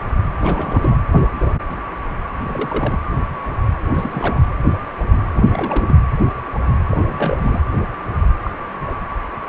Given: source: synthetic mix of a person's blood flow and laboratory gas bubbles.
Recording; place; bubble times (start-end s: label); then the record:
Doppler ultrasound of blood flow; precordium
0.38-0.98 s: bubbles
2.45-2.99 s: bubbles
3.94-4.39 s: bubbles
5.34-5.95 s: bubbles
6.89-7.39 s: bubbles
7.42-7.60 s: bubbles
8.43-8.51 s: bubbles
8.87-8.96 s: bubbles
From the record:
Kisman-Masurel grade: 221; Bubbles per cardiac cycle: several, 3 to 8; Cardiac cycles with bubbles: 10 to 50%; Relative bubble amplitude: barely perceptible (0.100 to 0.250); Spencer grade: 2 (many but less than half of the cardiac periods contain bubble signals, singularly or in groups); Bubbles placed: anywhere in the cardiac cycle